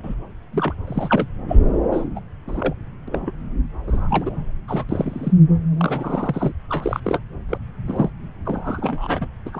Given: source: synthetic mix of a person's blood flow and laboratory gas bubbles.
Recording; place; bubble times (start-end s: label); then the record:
Doppler ultrasound of blood flow; subclavian vein
0.03-0.15 s: bubbles
0.52-0.78 s: bubbles
0.87-1.26 s: bubbles
1.48-1.60 s: bubbles
1.92-2.05 s: bubbles
2.15-2.20 s: bubbles
2.47-2.75 s: bubbles
3.07-3.32 s: bubbles
3.87-4.50 s: bubbles
4.67-4.84 s: bubbles
4.89-5.33 s: bubbles
5.77-6.52 s: bubbles
6.68-7.00 s: bubbles
7.04-7.20 s: bubbles
7.49-7.58 s: bubbles
7.87-8.10 s: bubbles
8.45-9.28 s: bubbles
9.45-9.60 s: bubbles
From the record:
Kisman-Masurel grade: 242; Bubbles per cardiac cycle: several, 3 to 8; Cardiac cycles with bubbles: 100%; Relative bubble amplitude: moderate (0.250 to 0.450); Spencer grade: 3 (all of the cardiac periods contain showers or single bubble signals, but not dominating or overriding the cardiac motion signals); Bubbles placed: anywhere in the cardiac cycle